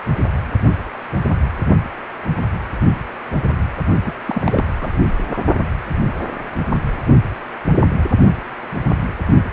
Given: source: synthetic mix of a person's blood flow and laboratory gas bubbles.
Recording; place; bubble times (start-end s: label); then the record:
Doppler ultrasound of blood flow; precordium
4.04-4.13 s: bubbles
4.26-4.65 s: bubbles
4.81-4.97 s: bubbles
5.33-5.38 s: bubbles
From the record:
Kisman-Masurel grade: 212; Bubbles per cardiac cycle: several, 3 to 8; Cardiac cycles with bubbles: 1 to 10%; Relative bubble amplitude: moderate (0.250 to 0.450); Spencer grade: 1 (occasional bubble signal discernible with the cardiac motion signal, with majority of cardiac periods free of bubbles); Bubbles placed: only in the low amplitude regions of the cardiac cycle